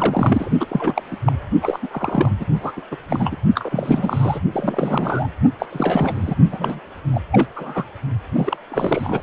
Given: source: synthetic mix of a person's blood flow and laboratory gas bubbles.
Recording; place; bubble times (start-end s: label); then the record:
Doppler ultrasound of blood flow; precordium
0.00-0.50 s: bubbles
0.59-0.66 s: bubbles
0.68-1.03 s: bubbles
1.10-1.17 s: bubbles
1.25-1.32 s: bubbles
1.62-1.79 s: bubbles
1.82-1.88 s: bubbles
1.90-2.32 s: bubbles
2.39-2.45 s: bubbles
2.62-2.73 s: bubbles
2.77-2.81 s: bubbles
2.91-2.96 s: bubbles
3.08-3.37 s: bubbles
3.54-4.41 s: bubbles
4.52-5.28 s: bubbles
5.59-5.67 s: bubbles
5.72-6.36 s: bubbles
6.51-6.79 s: bubbles
7.11-7.21 s: bubbles
7.32-7.47 s: bubbles
7.56-7.84 s: bubbles
8.34-8.57 s: bubbles
8.71-9.21 s: bubbles
From the record:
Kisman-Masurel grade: 342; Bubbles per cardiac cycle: rolling drumbeat, 9 or more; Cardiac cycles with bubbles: 100%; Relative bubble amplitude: moderate (0.250 to 0.450); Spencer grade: 3 (all of the cardiac periods contain showers or single bubble signals, but not dominating or overriding the cardiac motion signals); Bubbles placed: only in the low amplitude regions of the cardiac cycle